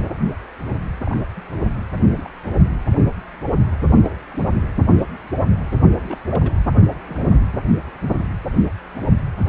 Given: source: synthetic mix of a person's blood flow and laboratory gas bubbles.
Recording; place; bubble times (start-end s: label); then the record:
Doppler ultrasound of blood flow; precordium
1.06-1.19 s: bubbles
1.36-1.40 s: bubbles
1.52-1.58 s: bubbles
2.06-2.27 s: bubbles
2.44-2.53 s: bubbles
4.03-4.17 s: bubbles
4.29-4.69 s: bubbles
5.84-6.18 s: bubbles
6.31-6.54 s: bubbles
6.75-6.94 s: bubbles
7.08-7.41 s: bubbles
From the record:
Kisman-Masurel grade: 221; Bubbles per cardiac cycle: several, 3 to 8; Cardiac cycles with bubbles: 10 to 50%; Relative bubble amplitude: barely perceptible (0.100 to 0.250); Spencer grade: 2 (many but less than half of the cardiac periods contain bubble signals, singularly or in groups); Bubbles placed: anywhere in the cardiac cycle